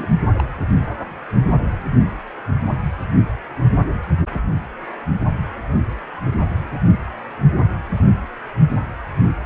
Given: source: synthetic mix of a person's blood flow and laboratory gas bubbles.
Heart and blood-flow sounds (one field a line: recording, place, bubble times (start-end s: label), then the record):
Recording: Doppler ultrasound of blood flow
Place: precordium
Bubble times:
0.00-0.07 s: bubbles
0.38-0.44 s: bubbles
From the record:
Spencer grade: 1 (occasional bubble signal discernible with the cardiac motion signal, with majority of cardiac periods free of bubbles)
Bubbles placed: anywhere in the cardiac cycle